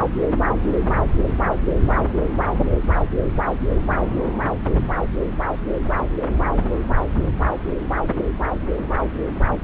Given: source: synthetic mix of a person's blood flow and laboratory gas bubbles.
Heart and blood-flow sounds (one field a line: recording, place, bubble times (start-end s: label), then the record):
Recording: Doppler ultrasound of blood flow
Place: subclavian vein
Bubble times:
no bubbles
From the record:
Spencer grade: 0 (complete lack of bubble signals)